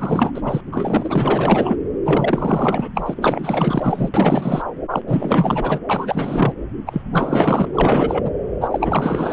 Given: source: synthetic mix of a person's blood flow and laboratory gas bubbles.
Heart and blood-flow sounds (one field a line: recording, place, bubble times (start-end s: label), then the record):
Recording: Doppler ultrasound of blood flow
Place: subclavian vein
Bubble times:
0.00-0.41 s: bubbles
0.44-0.61 s: bubbles
0.71-1.76 s: bubbles
2.05-2.90 s: bubbles
2.95-3.02 s: bubbles
3.06-4.09 s: bubbles
4.13-4.62 s: bubbles
4.90-5.00 s: bubbles
5.07-5.80 s: bubbles
5.89-6.52 s: bubbles
6.86-7.02 s: bubbles
7.13-7.66 s: bubbles
7.72-8.30 s: bubbles
8.61-8.68 s: bubbles
8.71-9.33 s: bubbles
From the record:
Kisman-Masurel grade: 444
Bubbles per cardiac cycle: continuous sound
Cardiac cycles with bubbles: 100%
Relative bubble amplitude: maximal (0.775 to 0.999)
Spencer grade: 4 (maximum detectable bubble signal sounding continuously throughout systole and diastole of every cardiac period, and overriding the amplitude of the normal cardiac signals)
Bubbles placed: anywhere in the cardiac cycle